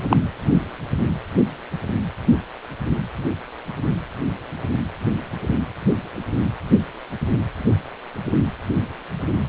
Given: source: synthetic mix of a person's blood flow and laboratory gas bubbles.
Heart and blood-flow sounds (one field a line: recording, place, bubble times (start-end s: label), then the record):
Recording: Doppler ultrasound of blood flow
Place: precordium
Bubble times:
0.09-0.17 s: bubbles
From the record:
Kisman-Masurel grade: 113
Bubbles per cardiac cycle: 1 to 2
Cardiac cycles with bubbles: 1 to 10%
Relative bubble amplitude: loud (0.450 to 0.775)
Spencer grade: 1 (occasional bubble signal discernible with the cardiac motion signal, with majority of cardiac periods free of bubbles)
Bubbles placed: anywhere in the cardiac cycle